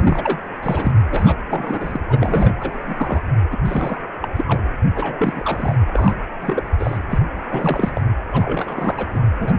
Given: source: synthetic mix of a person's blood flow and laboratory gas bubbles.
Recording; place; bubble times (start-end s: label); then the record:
Doppler ultrasound of blood flow; precordium
0.00-0.38 s: bubbles
0.62-0.92 s: bubbles
1.10-1.36 s: bubbles
1.50-2.00 s: bubbles
2.08-2.81 s: bubbles
2.84-3.21 s: bubbles
3.51-3.57 s: bubbles
3.65-4.01 s: bubbles
4.22-4.28 s: bubbles
4.36-4.45 s: bubbles
4.47-4.68 s: bubbles
4.95-5.76 s: bubbles
5.93-6.16 s: bubbles
6.42-6.63 s: bubbles
6.79-6.98 s: bubbles
7.09-7.20 s: bubbles
7.50-8.01 s: bubbles
8.32-9.07 s: bubbles
9.14-9.19 s: bubbles
9.39-9.59 s: bubbles
From the record:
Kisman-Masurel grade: 342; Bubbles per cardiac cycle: rolling drumbeat, 9 or more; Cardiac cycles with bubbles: 100%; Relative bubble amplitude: moderate (0.250 to 0.450); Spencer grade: 3 (all of the cardiac periods contain showers or single bubble signals, but not dominating or overriding the cardiac motion signals); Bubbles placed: anywhere in the cardiac cycle